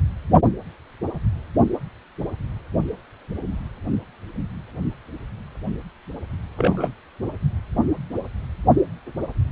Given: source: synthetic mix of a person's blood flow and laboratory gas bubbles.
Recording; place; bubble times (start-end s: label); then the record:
Doppler ultrasound of blood flow; precordium
6.57-6.88 s: bubbles
From the record:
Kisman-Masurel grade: 112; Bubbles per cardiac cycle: 1 to 2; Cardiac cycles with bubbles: 1 to 10%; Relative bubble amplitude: moderate (0.250 to 0.450); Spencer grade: 1 (occasional bubble signal discernible with the cardiac motion signal, with majority of cardiac periods free of bubbles); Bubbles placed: only in the low amplitude regions of the cardiac cycle